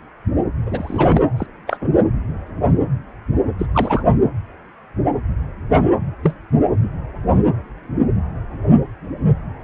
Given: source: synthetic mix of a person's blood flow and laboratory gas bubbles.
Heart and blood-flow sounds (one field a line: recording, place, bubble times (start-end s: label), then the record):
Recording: Doppler ultrasound of blood flow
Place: precordium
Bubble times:
0.66-1.22 s: bubbles
1.36-1.46 s: bubbles
1.67-1.77 s: bubbles
1.81-1.89 s: bubbles
1.97-2.03 s: bubbles
3.58-3.66 s: bubbles
3.74-4.04 s: bubbles
6.23-6.33 s: bubbles
6.83-6.91 s: bubbles
From the record:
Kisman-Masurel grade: 222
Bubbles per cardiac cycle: several, 3 to 8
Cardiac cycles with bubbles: 10 to 50%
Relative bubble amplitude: moderate (0.250 to 0.450)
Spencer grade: 2 (many but less than half of the cardiac periods contain bubble signals, singularly or in groups)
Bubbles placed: anywhere in the cardiac cycle